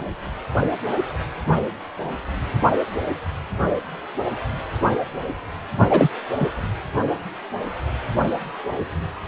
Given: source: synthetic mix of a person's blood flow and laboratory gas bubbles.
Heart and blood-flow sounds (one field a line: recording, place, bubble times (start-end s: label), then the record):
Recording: Doppler ultrasound of blood flow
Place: precordium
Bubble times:
5.89-6.08 s: bubbles
6.39-6.47 s: bubbles
From the record:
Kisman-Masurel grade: 213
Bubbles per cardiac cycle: several, 3 to 8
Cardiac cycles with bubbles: 1 to 10%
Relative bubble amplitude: loud (0.450 to 0.775)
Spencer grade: 1 (occasional bubble signal discernible with the cardiac motion signal, with majority of cardiac periods free of bubbles)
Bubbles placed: anywhere in the cardiac cycle